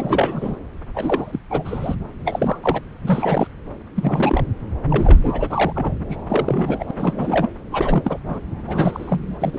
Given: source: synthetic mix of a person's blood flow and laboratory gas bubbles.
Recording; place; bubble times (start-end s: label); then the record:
Doppler ultrasound of blood flow; subclavian vein
0.00-0.56 s: bubbles
0.95-1.39 s: bubbles
1.50-1.95 s: bubbles
2.25-2.58 s: bubbles
2.62-2.82 s: bubbles
3.03-3.47 s: bubbles
3.96-4.44 s: bubbles
4.90-5.91 s: bubbles
6.09-6.17 s: bubbles
6.29-6.84 s: bubbles
6.88-6.91 s: bubbles
6.97-7.49 s: bubbles
7.71-8.19 s: bubbles
8.27-8.39 s: bubbles
8.67-9.38 s: bubbles
9.40-9.59 s: bubbles
From the record:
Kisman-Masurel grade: 342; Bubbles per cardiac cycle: rolling drumbeat, 9 or more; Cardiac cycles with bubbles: 100%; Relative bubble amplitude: moderate (0.250 to 0.450); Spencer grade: 3 (all of the cardiac periods contain showers or single bubble signals, but not dominating or overriding the cardiac motion signals); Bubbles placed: anywhere in the cardiac cycle